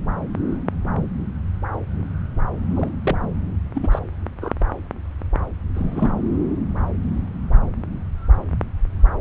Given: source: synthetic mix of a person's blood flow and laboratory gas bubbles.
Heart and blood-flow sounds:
Doppler ultrasound of blood flow; subclavian vein
2.76-2.89 s: bubbles
3.02-3.16 s: bubbles
3.75-3.88 s: bubbles
3.91-3.99 s: bubbles
4.41-4.53 s: bubbles
5.75-6.12 s: bubbles
From the record:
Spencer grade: 2 (many but less than half of the cardiac periods contain bubble signals, singularly or in groups); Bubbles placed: anywhere in the cardiac cycle

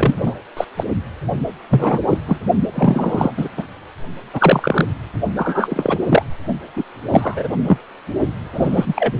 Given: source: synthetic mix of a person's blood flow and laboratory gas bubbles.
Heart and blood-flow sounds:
Doppler ultrasound of blood flow; precordium
0.00-0.34 s: bubbles
0.56-0.65 s: bubbles
0.77-0.84 s: bubbles
1.69-2.00 s: bubbles
2.10-2.18 s: bubbles
2.26-2.39 s: bubbles
2.71-3.31 s: bubbles
3.37-3.48 s: bubbles
3.57-3.63 s: bubbles
4.33-4.87 s: bubbles
5.37-5.99 s: bubbles
6.08-6.22 s: bubbles
6.76-6.83 s: bubbles
7.08-7.49 s: bubbles
7.68-7.78 s: bubbles
8.54-9.12 s: bubbles
From the record:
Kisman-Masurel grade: 243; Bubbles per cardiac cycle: several, 3 to 8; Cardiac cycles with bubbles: 100%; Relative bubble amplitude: loud (0.450 to 0.775); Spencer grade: 3 (all of the cardiac periods contain showers or single bubble signals, but not dominating or overriding the cardiac motion signals); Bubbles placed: only in the low amplitude regions of the cardiac cycle

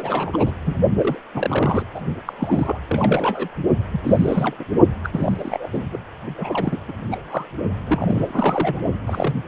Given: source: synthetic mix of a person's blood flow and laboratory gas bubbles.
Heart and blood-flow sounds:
Doppler ultrasound of blood flow; precordium
0.00-0.52 s: bubbles
0.66-0.75 s: bubbles
0.98-1.19 s: bubbles
1.34-1.83 s: bubbles
1.94-2.00 s: bubbles
2.25-2.33 s: bubbles
2.38-2.79 s: bubbles
2.88-3.48 s: bubbles
3.92-4.00 s: bubbles
4.04-4.56 s: bubbles
4.58-4.64 s: bubbles
5.04-5.09 s: bubbles
5.12-5.69 s: bubbles
5.72-5.83 s: bubbles
5.92-5.99 s: bubbles
6.38-6.80 s: bubbles
6.88-6.93 s: bubbles
7.11-7.17 s: bubbles
7.30-7.45 s: bubbles
7.86-8.79 s: bubbles
9.06-9.34 s: bubbles
From the record:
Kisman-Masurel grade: 342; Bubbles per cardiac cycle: rolling drumbeat, 9 or more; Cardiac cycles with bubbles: 100%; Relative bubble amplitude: moderate (0.250 to 0.450); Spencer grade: 3 (all of the cardiac periods contain showers or single bubble signals, but not dominating or overriding the cardiac motion signals); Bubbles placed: only in the low amplitude regions of the cardiac cycle

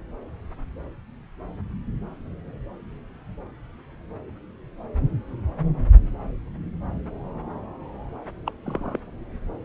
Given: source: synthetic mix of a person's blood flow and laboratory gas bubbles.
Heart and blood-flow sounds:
Doppler ultrasound of blood flow; subclavian vein
8.46-8.52 s: bubbles
8.63-9.00 s: bubbles
From the record:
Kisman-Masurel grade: 111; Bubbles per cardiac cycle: 1 to 2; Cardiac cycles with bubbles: 1 to 10%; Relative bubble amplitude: barely perceptible (0.100 to 0.250); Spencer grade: 1 (occasional bubble signal discernible with the cardiac motion signal, with majority of cardiac periods free of bubbles); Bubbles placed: anywhere in the cardiac cycle

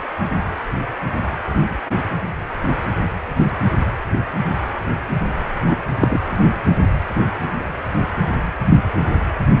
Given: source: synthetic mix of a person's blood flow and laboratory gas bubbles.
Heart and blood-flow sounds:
Doppler ultrasound of blood flow; precordium
5.66-5.78 s: bubbles
5.98-6.21 s: bubbles
From the record:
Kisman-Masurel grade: 113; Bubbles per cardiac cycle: 1 to 2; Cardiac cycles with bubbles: 1 to 10%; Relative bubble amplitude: loud (0.450 to 0.775); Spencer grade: 1 (occasional bubble signal discernible with the cardiac motion signal, with majority of cardiac periods free of bubbles); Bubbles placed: anywhere in the cardiac cycle

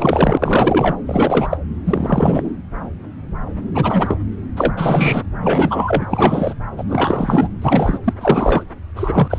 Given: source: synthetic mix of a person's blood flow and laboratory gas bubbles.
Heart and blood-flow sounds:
Doppler ultrasound of blood flow; subclavian vein
0.00-0.95 s: bubbles
1.06-1.48 s: bubbles
1.50-1.58 s: bubbles
1.85-2.50 s: bubbles
3.75-4.17 s: bubbles
4.57-4.73 s: bubbles
4.76-5.22 s: bubbles
5.44-6.06 s: bubbles
6.09-6.54 s: bubbles
6.78-6.83 s: bubbles
6.90-7.49 s: bubbles
7.62-7.99 s: bubbles
8.04-8.13 s: bubbles
8.20-8.63 s: bubbles
8.96-9.39 s: bubbles
From the record:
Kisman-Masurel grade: 333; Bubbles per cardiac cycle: rolling drumbeat, 9 or more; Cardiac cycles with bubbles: 50 to 99%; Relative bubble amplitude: loud (0.450 to 0.775); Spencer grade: 3 (all of the cardiac periods contain showers or single bubble signals, but not dominating or overriding the cardiac motion signals); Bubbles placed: anywhere in the cardiac cycle

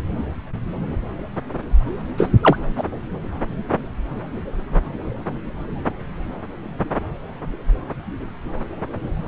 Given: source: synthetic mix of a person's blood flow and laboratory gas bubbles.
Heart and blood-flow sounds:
Doppler ultrasound of blood flow; subclavian vein
2.18-2.29 s: bubbles
2.43-2.57 s: bubbles
2.77-2.83 s: bubbles
From the record:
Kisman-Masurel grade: 213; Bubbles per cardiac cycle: several, 3 to 8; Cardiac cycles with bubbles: 1 to 10%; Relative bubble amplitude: loud (0.450 to 0.775); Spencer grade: 1 (occasional bubble signal discernible with the cardiac motion signal, with majority of cardiac periods free of bubbles); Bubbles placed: anywhere in the cardiac cycle

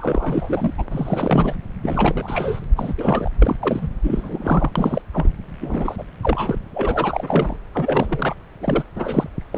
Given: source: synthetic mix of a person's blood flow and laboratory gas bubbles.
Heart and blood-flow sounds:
Doppler ultrasound of blood flow; subclavian vein
0.00-0.74 s: bubbles
0.77-0.86 s: bubbles
0.91-1.56 s: bubbles
1.82-2.65 s: bubbles
2.76-2.94 s: bubbles
2.98-3.30 s: bubbles
3.42-3.56 s: bubbles
3.59-3.88 s: bubbles
4.03-4.71 s: bubbles
4.75-5.01 s: bubbles
5.12-5.29 s: bubbles
5.60-6.04 s: bubbles
6.21-6.59 s: bubbles
6.74-7.56 s: bubbles
7.73-8.37 s: bubbles
8.61-8.83 s: bubbles
8.96-9.29 s: bubbles
9.53-9.58 s: bubbles
From the record:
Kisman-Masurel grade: 342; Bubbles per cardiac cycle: rolling drumbeat, 9 or more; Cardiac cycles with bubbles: 100%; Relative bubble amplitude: moderate (0.250 to 0.450); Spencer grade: 3 (all of the cardiac periods contain showers or single bubble signals, but not dominating or overriding the cardiac motion signals); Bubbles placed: anywhere in the cardiac cycle

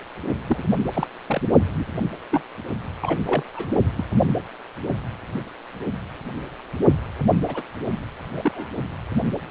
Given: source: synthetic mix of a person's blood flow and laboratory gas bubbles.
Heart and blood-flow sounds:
Doppler ultrasound of blood flow; precordium
0.46-0.63 s: bubbles
0.93-1.07 s: bubbles
1.27-1.42 s: bubbles
1.78-1.84 s: bubbles
2.30-2.42 s: bubbles
3.01-3.20 s: bubbles
3.26-3.42 s: bubbles
3.55-3.68 s: bubbles
3.97-4.04 s: bubbles
7.47-7.62 s: bubbles
8.34-8.69 s: bubbles
From the record:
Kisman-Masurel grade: 232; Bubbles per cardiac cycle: several, 3 to 8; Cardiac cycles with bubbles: 50 to 99%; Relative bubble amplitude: moderate (0.250 to 0.450); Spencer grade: 3 (all of the cardiac periods contain showers or single bubble signals, but not dominating or overriding the cardiac motion signals); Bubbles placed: only in the low amplitude regions of the cardiac cycle

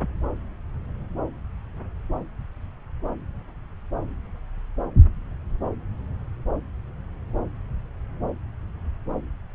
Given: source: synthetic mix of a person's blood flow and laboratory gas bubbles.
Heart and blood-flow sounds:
Doppler ultrasound of blood flow; subclavian vein
no bubbles
From the record:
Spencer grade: 0 (complete lack of bubble signals)

